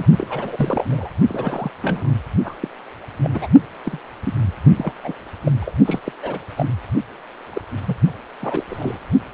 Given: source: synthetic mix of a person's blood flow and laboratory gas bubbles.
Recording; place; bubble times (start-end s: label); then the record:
Doppler ultrasound of blood flow; precordium
0.00-0.06 s: bubbles
0.16-0.85 s: bubbles
0.91-1.09 s: bubbles
1.29-1.70 s: bubbles
1.83-2.10 s: bubbles
2.44-2.56 s: bubbles
2.60-2.69 s: bubbles
3.21-3.30 s: bubbles
3.33-3.47 s: bubbles
3.85-3.99 s: bubbles
4.24-4.33 s: bubbles
4.76-4.92 s: bubbles
5.04-5.13 s: bubbles
5.46-5.51 s: bubbles
5.61-5.71 s: bubbles
5.85-6.00 s: bubbles
6.04-6.12 s: bubbles
6.22-6.39 s: bubbles
6.57-6.70 s: bubbles
7.53-7.62 s: bubbles
7.86-7.96 s: bubbles
8.40-8.64 s: bubbles
8.69-8.98 s: bubbles
From the record:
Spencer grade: 3 (all of the cardiac periods contain showers or single bubble signals, but not dominating or overriding the cardiac motion signals); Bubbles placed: only in the low amplitude regions of the cardiac cycle